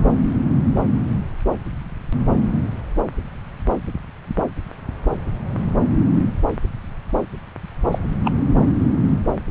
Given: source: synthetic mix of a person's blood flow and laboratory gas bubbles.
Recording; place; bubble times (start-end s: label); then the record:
Doppler ultrasound of blood flow; subclavian vein
7.92-7.99 s: bubbles
8.25-8.32 s: bubbles
From the record:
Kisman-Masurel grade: 112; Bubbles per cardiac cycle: 1 to 2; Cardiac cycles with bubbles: 1 to 10%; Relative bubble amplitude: moderate (0.250 to 0.450); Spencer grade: 1 (occasional bubble signal discernible with the cardiac motion signal, with majority of cardiac periods free of bubbles); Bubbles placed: anywhere in the cardiac cycle